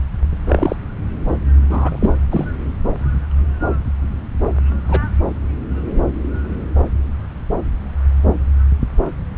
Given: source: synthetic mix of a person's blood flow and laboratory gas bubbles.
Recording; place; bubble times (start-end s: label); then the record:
Doppler ultrasound of blood flow; subclavian vein
0.48-0.76 s: bubbles
1.69-2.13 s: bubbles
2.30-2.46 s: bubbles
4.88-5.04 s: bubbles
From the record:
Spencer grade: 2 (many but less than half of the cardiac periods contain bubble signals, singularly or in groups); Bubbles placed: anywhere in the cardiac cycle